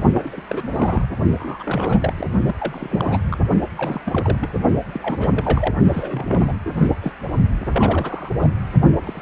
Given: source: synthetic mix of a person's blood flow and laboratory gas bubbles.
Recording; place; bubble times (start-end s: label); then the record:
Doppler ultrasound of blood flow; precordium
0.14-0.30 s: bubbles
0.33-0.41 s: bubbles
0.48-1.05 s: bubbles
1.38-2.13 s: bubbles
2.17-2.27 s: bubbles
2.47-2.56 s: bubbles
2.58-3.38 s: bubbles
3.77-4.50 s: bubbles
4.87-5.74 s: bubbles
5.93-6.25 s: bubbles
6.28-6.54 s: bubbles
6.65-6.73 s: bubbles
6.77-6.88 s: bubbles
7.01-7.12 s: bubbles
7.60-8.29 s: bubbles
8.39-8.50 s: bubbles
9.04-9.22 s: bubbles
From the record:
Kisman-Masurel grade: 332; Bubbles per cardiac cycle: rolling drumbeat, 9 or more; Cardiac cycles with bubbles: 50 to 99%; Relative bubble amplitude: moderate (0.250 to 0.450); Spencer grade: 3 (all of the cardiac periods contain showers or single bubble signals, but not dominating or overriding the cardiac motion signals); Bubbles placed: only in the low amplitude regions of the cardiac cycle